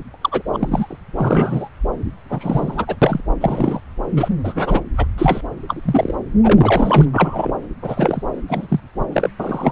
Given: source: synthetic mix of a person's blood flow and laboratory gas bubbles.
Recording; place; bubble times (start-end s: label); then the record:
Doppler ultrasound of blood flow; subclavian vein
0.14-0.16 s: bubbles
0.21-0.42 s: bubbles
0.53-0.96 s: bubbles
1.18-1.69 s: bubbles
2.25-2.96 s: bubbles
3.02-3.21 s: bubbles
3.41-3.81 s: bubbles
4.17-4.29 s: bubbles
4.44-4.81 s: bubbles
4.97-5.06 s: bubbles
5.17-5.41 s: bubbles
5.69-6.16 s: bubbles
6.42-7.06 s: bubbles
7.13-7.53 s: bubbles
7.82-8.22 s: bubbles
8.47-8.80 s: bubbles
9.12-9.29 s: bubbles
9.39-9.72 s: bubbles
From the record:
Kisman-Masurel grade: 233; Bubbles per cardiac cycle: several, 3 to 8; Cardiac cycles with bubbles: 50 to 99%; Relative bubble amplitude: loud (0.450 to 0.775); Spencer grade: 3 (all of the cardiac periods contain showers or single bubble signals, but not dominating or overriding the cardiac motion signals); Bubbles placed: anywhere in the cardiac cycle